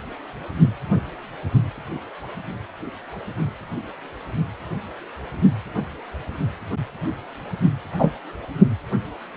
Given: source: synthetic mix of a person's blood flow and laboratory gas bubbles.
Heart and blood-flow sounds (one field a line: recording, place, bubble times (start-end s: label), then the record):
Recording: Doppler ultrasound of blood flow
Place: precordium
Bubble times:
7.99-8.11 s: bubbles
From the record:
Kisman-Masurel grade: 113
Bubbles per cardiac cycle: 1 to 2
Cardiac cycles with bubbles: 1 to 10%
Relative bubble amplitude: loud (0.450 to 0.775)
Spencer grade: 1 (occasional bubble signal discernible with the cardiac motion signal, with majority of cardiac periods free of bubbles)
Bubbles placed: only in the low amplitude regions of the cardiac cycle